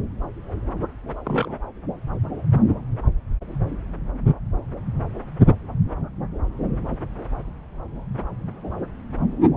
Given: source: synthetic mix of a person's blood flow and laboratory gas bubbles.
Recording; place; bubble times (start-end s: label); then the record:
Doppler ultrasound of blood flow; subclavian vein
1.25-1.57 s: bubbles
From the record:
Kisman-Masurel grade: 112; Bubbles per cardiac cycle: 1 to 2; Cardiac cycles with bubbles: 1 to 10%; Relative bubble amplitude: moderate (0.250 to 0.450); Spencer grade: 1 (occasional bubble signal discernible with the cardiac motion signal, with majority of cardiac periods free of bubbles); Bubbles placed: anywhere in the cardiac cycle